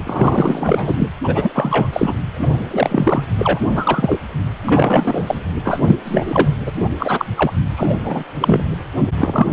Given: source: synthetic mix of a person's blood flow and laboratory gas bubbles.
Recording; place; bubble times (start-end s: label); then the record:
Doppler ultrasound of blood flow; precordium
0.03-1.08 s: bubbles
1.24-1.89 s: bubbles
1.93-2.15 s: bubbles
2.33-3.24 s: bubbles
3.38-3.70 s: bubbles
3.75-4.18 s: bubbles
4.64-5.39 s: bubbles
5.63-5.80 s: bubbles
5.87-5.96 s: bubbles
6.05-6.55 s: bubbles
6.66-6.71 s: bubbles
6.76-6.89 s: bubbles
6.98-7.25 s: bubbles
7.37-7.51 s: bubbles
7.76-8.00 s: bubbles
8.03-8.24 s: bubbles
8.39-8.66 s: bubbles
9.17-9.47 s: bubbles
From the record:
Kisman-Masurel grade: 343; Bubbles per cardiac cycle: rolling drumbeat, 9 or more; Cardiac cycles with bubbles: 100%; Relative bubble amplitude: loud (0.450 to 0.775); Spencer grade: 3 (all of the cardiac periods contain showers or single bubble signals, but not dominating or overriding the cardiac motion signals); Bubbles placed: anywhere in the cardiac cycle